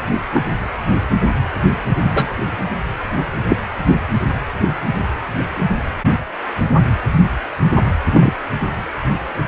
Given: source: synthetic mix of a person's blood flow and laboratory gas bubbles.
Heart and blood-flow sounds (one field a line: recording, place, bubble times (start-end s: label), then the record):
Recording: Doppler ultrasound of blood flow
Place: precordium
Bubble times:
0.34-0.41 s: bubbles
2.04-2.30 s: bubbles
3.50-3.56 s: bubbles
8.11-8.33 s: bubbles
From the record:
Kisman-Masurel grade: 123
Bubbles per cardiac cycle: 1 to 2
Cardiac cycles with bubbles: 10 to 50%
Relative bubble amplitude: loud (0.450 to 0.775)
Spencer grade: 2 (many but less than half of the cardiac periods contain bubble signals, singularly or in groups)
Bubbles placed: anywhere in the cardiac cycle